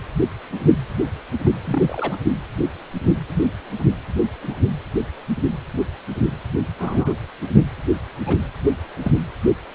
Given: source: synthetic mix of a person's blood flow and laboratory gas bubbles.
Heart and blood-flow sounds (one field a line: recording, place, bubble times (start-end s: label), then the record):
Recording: Doppler ultrasound of blood flow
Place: precordium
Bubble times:
1.45-1.50 s: bubbles
1.65-2.18 s: bubbles
3.28-3.46 s: bubbles
4.42-4.56 s: bubbles
6.79-7.13 s: bubbles
7.53-7.66 s: bubbles
8.26-8.37 s: bubbles
9.03-9.13 s: bubbles
From the record:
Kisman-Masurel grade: 122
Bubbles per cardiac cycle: 1 to 2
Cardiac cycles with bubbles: 10 to 50%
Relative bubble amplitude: moderate (0.250 to 0.450)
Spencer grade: 2 (many but less than half of the cardiac periods contain bubble signals, singularly or in groups)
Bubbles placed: anywhere in the cardiac cycle